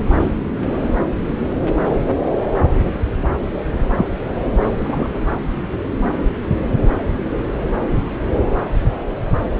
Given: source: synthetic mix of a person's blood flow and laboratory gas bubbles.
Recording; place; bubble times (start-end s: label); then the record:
Doppler ultrasound of blood flow; subclavian vein
4.59-5.16 s: bubbles
From the record:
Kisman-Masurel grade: 112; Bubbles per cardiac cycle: 1 to 2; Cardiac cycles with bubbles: 1 to 10%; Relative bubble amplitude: moderate (0.250 to 0.450); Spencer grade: 1 (occasional bubble signal discernible with the cardiac motion signal, with majority of cardiac periods free of bubbles); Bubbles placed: anywhere in the cardiac cycle